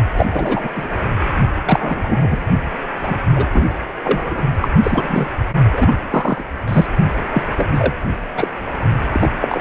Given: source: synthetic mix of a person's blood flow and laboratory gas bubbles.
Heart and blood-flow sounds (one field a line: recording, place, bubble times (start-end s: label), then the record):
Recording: Doppler ultrasound of blood flow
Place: precordium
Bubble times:
0.17-0.26 s: bubbles
0.34-0.69 s: bubbles
0.75-0.88 s: bubbles
1.65-2.39 s: bubbles
3.02-3.17 s: bubbles
3.35-3.46 s: bubbles
3.52-3.66 s: bubbles
4.04-4.41 s: bubbles
4.62-4.68 s: bubbles
4.83-5.28 s: bubbles
5.72-5.92 s: bubbles
6.11-6.43 s: bubbles
6.67-6.87 s: bubbles
7.33-7.43 s: bubbles
7.57-7.70 s: bubbles
7.72-7.93 s: bubbles
8.36-8.47 s: bubbles
9.12-9.30 s: bubbles
9.41-9.61 s: bubbles
From the record:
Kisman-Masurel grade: 243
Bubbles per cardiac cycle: several, 3 to 8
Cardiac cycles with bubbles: 100%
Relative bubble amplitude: loud (0.450 to 0.775)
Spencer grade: 3 (all of the cardiac periods contain showers or single bubble signals, but not dominating or overriding the cardiac motion signals)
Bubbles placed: only in the low amplitude regions of the cardiac cycle